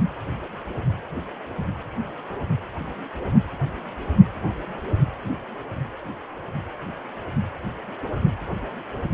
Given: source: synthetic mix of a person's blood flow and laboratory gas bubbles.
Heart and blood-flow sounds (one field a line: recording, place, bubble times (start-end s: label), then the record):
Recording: Doppler ultrasound of blood flow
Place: precordium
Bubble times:
no bubbles
From the record:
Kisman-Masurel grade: 000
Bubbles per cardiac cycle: 0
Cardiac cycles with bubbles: 0%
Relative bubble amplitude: no bubbles discernible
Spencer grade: 0 (complete lack of bubble signals)